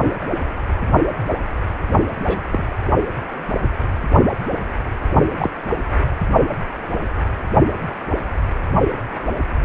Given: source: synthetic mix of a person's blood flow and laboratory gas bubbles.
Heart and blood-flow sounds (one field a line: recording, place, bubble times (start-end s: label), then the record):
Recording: Doppler ultrasound of blood flow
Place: precordium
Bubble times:
2.24-2.40 s: bubbles
2.51-2.67 s: bubbles
5.39-5.50 s: bubbles
From the record:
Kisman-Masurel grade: 122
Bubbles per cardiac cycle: 1 to 2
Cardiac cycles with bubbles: 10 to 50%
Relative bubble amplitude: moderate (0.250 to 0.450)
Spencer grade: 2 (many but less than half of the cardiac periods contain bubble signals, singularly or in groups)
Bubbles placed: only in the low amplitude regions of the cardiac cycle